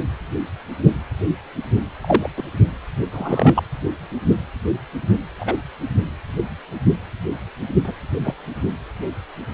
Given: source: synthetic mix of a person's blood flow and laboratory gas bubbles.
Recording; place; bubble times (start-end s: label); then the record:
Doppler ultrasound of blood flow; precordium
2.01-2.30 s: bubbles
2.37-2.43 s: bubbles
3.12-3.62 s: bubbles
5.39-5.56 s: bubbles
7.84-7.93 s: bubbles
8.24-8.35 s: bubbles
From the record:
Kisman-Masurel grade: 122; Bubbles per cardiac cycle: 1 to 2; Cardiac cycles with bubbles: 10 to 50%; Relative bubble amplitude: moderate (0.250 to 0.450); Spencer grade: 2 (many but less than half of the cardiac periods contain bubble signals, singularly or in groups); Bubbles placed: only in the low amplitude regions of the cardiac cycle